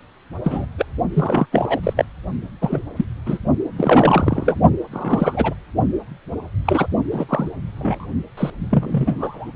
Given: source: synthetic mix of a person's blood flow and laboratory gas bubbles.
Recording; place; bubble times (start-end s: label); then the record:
Doppler ultrasound of blood flow; precordium
0.44-0.66 s: bubbles
0.78-0.86 s: bubbles
1.13-1.46 s: bubbles
1.51-1.80 s: bubbles
1.83-1.93 s: bubbles
1.96-2.05 s: bubbles
2.61-2.79 s: bubbles
2.96-3.04 s: bubbles
3.25-3.38 s: bubbles
3.76-4.62 s: bubbles
4.91-5.54 s: bubbles
6.65-6.87 s: bubbles
7.11-7.26 s: bubbles
7.29-7.50 s: bubbles
7.78-8.07 s: bubbles
8.37-8.50 s: bubbles
8.70-9.51 s: bubbles
From the record:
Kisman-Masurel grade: 233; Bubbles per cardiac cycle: several, 3 to 8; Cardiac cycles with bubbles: 50 to 99%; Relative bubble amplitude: loud (0.450 to 0.775); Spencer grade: 3 (all of the cardiac periods contain showers or single bubble signals, but not dominating or overriding the cardiac motion signals); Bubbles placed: only in the low amplitude regions of the cardiac cycle